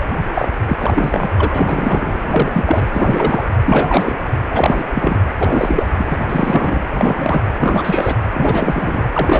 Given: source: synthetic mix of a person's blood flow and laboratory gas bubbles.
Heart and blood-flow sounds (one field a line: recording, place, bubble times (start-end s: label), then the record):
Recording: Doppler ultrasound of blood flow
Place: precordium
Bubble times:
0.00-0.06 s: bubbles
0.34-0.48 s: bubbles
0.67-1.28 s: bubbles
1.36-2.19 s: bubbles
2.23-2.85 s: bubbles
2.94-3.48 s: bubbles
3.65-4.14 s: bubbles
4.51-4.84 s: bubbles
4.95-5.21 s: bubbles
5.38-5.87 s: bubbles
5.98-6.25 s: bubbles
6.29-6.83 s: bubbles
6.97-7.42 s: bubbles
7.59-8.15 s: bubbles
8.34-9.04 s: bubbles
9.12-9.40 s: bubbles
From the record:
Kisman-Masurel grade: 343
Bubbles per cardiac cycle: rolling drumbeat, 9 or more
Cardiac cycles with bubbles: 100%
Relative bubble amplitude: loud (0.450 to 0.775)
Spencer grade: 3 (all of the cardiac periods contain showers or single bubble signals, but not dominating or overriding the cardiac motion signals)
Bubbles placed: anywhere in the cardiac cycle